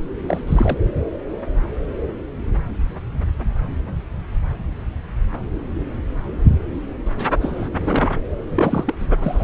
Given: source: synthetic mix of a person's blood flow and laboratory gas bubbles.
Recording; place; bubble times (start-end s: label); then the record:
Doppler ultrasound of blood flow; subclavian vein
0.27-0.43 s: bubbles
0.47-0.78 s: bubbles
7.41-7.69 s: bubbles
7.73-8.09 s: bubbles
8.48-8.94 s: bubbles
8.99-9.07 s: bubbles
9.21-9.44 s: bubbles
From the record:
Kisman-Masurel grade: 222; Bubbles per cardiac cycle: several, 3 to 8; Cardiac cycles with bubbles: 10 to 50%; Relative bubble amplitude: moderate (0.250 to 0.450); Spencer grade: 2 (many but less than half of the cardiac periods contain bubble signals, singularly or in groups); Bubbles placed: anywhere in the cardiac cycle